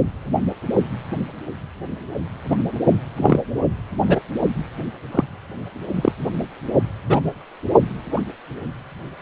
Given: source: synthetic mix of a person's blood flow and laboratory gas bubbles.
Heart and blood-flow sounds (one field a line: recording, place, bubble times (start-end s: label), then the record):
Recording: Doppler ultrasound of blood flow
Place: precordium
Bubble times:
2.50-2.56 s: bubbles
3.17-3.40 s: bubbles
4.07-4.19 s: bubbles
5.12-5.25 s: bubbles
5.95-6.12 s: bubbles
7.08-7.21 s: bubbles
8.12-8.21 s: bubbles
From the record:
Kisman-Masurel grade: 123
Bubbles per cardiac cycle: 1 to 2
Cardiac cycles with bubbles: 10 to 50%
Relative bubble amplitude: loud (0.450 to 0.775)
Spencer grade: 2 (many but less than half of the cardiac periods contain bubble signals, singularly or in groups)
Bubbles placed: anywhere in the cardiac cycle